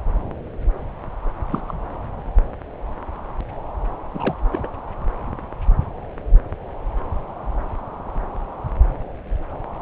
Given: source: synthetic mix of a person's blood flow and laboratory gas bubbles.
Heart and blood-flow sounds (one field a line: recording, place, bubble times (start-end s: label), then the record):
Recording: Doppler ultrasound of blood flow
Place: subclavian vein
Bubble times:
1.51-1.61 s: bubbles
1.67-1.73 s: bubbles
4.13-4.34 s: bubbles
4.52-4.67 s: bubbles
From the record:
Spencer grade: 1 (occasional bubble signal discernible with the cardiac motion signal, with majority of cardiac periods free of bubbles)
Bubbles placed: anywhere in the cardiac cycle